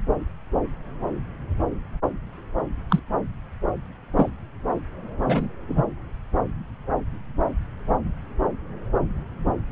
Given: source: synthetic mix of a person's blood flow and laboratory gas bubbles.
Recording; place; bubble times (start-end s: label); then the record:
Doppler ultrasound of blood flow; subclavian vein
2.90-3.00 s: bubbles
4.16-4.29 s: bubbles
5.26-5.48 s: bubbles
5.68-5.83 s: bubbles
From the record:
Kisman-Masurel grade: 122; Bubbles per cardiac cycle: 1 to 2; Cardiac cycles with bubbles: 10 to 50%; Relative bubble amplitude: moderate (0.250 to 0.450); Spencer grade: 2 (many but less than half of the cardiac periods contain bubble signals, singularly or in groups); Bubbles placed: anywhere in the cardiac cycle